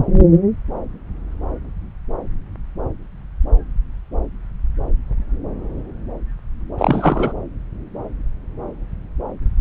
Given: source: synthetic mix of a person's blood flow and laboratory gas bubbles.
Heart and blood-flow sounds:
Doppler ultrasound of blood flow; subclavian vein
6.78-7.33 s: bubbles
From the record:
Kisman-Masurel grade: 213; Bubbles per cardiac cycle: several, 3 to 8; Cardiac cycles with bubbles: 1 to 10%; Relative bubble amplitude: loud (0.450 to 0.775); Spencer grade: 1 (occasional bubble signal discernible with the cardiac motion signal, with majority of cardiac periods free of bubbles); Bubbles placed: anywhere in the cardiac cycle

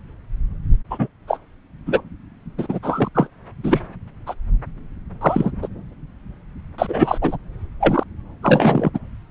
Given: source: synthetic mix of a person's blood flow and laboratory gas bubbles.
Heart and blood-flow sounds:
Doppler ultrasound of blood flow; subclavian vein
0.90-1.08 s: bubbles
1.27-1.38 s: bubbles
1.86-2.01 s: bubbles
2.58-2.79 s: bubbles
2.83-3.08 s: bubbles
3.15-3.27 s: bubbles
3.63-3.81 s: bubbles
4.26-4.34 s: bubbles
5.21-5.51 s: bubbles
5.62-5.68 s: bubbles
6.78-7.18 s: bubbles
7.21-7.37 s: bubbles
7.79-8.04 s: bubbles
8.43-8.90 s: bubbles
8.94-8.98 s: bubbles
From the record:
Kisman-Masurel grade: 233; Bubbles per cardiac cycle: several, 3 to 8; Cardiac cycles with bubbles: 50 to 99%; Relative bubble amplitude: loud (0.450 to 0.775); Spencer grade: 3 (all of the cardiac periods contain showers or single bubble signals, but not dominating or overriding the cardiac motion signals); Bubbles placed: anywhere in the cardiac cycle

